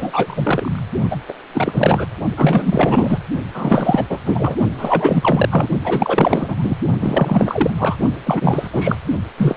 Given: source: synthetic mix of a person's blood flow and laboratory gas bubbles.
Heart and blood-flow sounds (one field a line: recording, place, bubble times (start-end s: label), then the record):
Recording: Doppler ultrasound of blood flow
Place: precordium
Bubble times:
0.00-0.83 s: bubbles
1.10-1.17 s: bubbles
1.28-1.33 s: bubbles
1.54-2.06 s: bubbles
2.37-3.20 s: bubbles
3.54-4.05 s: bubbles
4.09-4.18 s: bubbles
4.25-4.56 s: bubbles
4.77-5.48 s: bubbles
5.51-5.67 s: bubbles
5.83-6.78 s: bubbles
7.00-7.96 s: bubbles
8.25-8.68 s: bubbles
8.71-8.96 s: bubbles
9.37-9.57 s: bubbles
From the record:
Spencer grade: 4 (maximum detectable bubble signal sounding continuously throughout systole and diastole of every cardiac period, and overriding the amplitude of the normal cardiac signals)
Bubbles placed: only in the low amplitude regions of the cardiac cycle